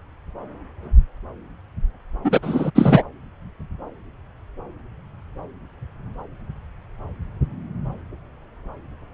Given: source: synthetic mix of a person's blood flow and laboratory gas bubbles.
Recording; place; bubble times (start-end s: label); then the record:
Doppler ultrasound of blood flow; subclavian vein
2.24-2.40 s: bubbles
2.42-2.71 s: bubbles
2.75-3.02 s: bubbles
From the record:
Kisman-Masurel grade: 213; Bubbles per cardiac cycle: several, 3 to 8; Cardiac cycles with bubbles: 1 to 10%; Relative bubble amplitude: loud (0.450 to 0.775); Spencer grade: 1 (occasional bubble signal discernible with the cardiac motion signal, with majority of cardiac periods free of bubbles); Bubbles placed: anywhere in the cardiac cycle